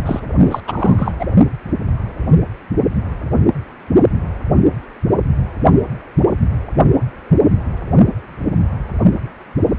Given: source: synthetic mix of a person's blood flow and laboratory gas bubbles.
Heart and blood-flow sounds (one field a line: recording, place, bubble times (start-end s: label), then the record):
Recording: Doppler ultrasound of blood flow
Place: precordium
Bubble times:
0.06-0.20 s: bubbles
0.42-0.60 s: bubbles
0.65-1.12 s: bubbles
1.19-1.25 s: bubbles
From the record:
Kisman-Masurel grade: 223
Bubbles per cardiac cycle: several, 3 to 8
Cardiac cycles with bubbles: 10 to 50%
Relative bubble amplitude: loud (0.450 to 0.775)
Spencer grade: 2 (many but less than half of the cardiac periods contain bubble signals, singularly or in groups)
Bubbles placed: only in the low amplitude regions of the cardiac cycle